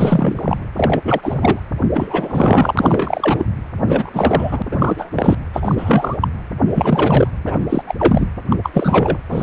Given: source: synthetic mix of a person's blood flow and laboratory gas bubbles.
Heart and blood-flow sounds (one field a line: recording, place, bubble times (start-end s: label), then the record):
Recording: Doppler ultrasound of blood flow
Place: precordium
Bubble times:
0.00-0.57 s: bubbles
0.76-1.00 s: bubbles
1.04-1.59 s: bubbles
1.93-2.75 s: bubbles
2.77-3.46 s: bubbles
3.87-4.62 s: bubbles
4.70-5.10 s: bubbles
5.12-5.37 s: bubbles
5.53-6.16 s: bubbles
6.21-6.28 s: bubbles
6.67-7.28 s: bubbles
7.46-7.57 s: bubbles
7.69-7.83 s: bubbles
7.87-7.95 s: bubbles
7.99-8.28 s: bubbles
8.50-8.56 s: bubbles
8.63-8.71 s: bubbles
8.73-9.18 s: bubbles
9.28-9.43 s: bubbles
From the record:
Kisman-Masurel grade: 343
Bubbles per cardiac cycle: rolling drumbeat, 9 or more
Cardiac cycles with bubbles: 100%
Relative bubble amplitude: loud (0.450 to 0.775)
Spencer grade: 3 (all of the cardiac periods contain showers or single bubble signals, but not dominating or overriding the cardiac motion signals)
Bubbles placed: anywhere in the cardiac cycle